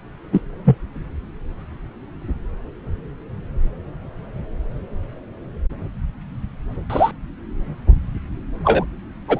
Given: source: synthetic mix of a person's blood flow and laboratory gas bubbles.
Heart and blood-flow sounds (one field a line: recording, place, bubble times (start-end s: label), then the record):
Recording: Doppler ultrasound of blood flow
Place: subclavian vein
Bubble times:
0.32-0.41 s: bubbles
0.64-0.77 s: bubbles
6.89-7.11 s: bubbles
8.63-8.85 s: bubbles
9.28-9.40 s: bubbles
From the record:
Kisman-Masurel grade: 123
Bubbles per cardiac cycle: 1 to 2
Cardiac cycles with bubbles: 10 to 50%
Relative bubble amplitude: loud (0.450 to 0.775)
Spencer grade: 2 (many but less than half of the cardiac periods contain bubble signals, singularly or in groups)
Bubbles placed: anywhere in the cardiac cycle